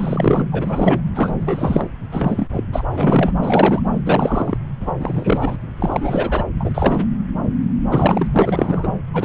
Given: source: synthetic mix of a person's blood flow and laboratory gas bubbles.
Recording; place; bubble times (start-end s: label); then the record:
Doppler ultrasound of blood flow; subclavian vein
0.00-0.42 s: bubbles
0.52-1.02 s: bubbles
1.15-1.31 s: bubbles
1.41-1.89 s: bubbles
2.11-2.49 s: bubbles
2.52-2.63 s: bubbles
2.72-2.83 s: bubbles
2.93-3.32 s: bubbles
3.41-3.80 s: bubbles
4.05-4.58 s: bubbles
4.80-4.91 s: bubbles
4.99-5.57 s: bubbles
5.79-6.44 s: bubbles
6.60-6.71 s: bubbles
6.74-7.07 s: bubbles
7.91-8.26 s: bubbles
8.33-8.94 s: bubbles
9.13-9.25 s: bubbles
From the record:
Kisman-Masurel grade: 333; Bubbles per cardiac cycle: rolling drumbeat, 9 or more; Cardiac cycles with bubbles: 50 to 99%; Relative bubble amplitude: loud (0.450 to 0.775); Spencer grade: 3 (all of the cardiac periods contain showers or single bubble signals, but not dominating or overriding the cardiac motion signals); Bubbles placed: anywhere in the cardiac cycle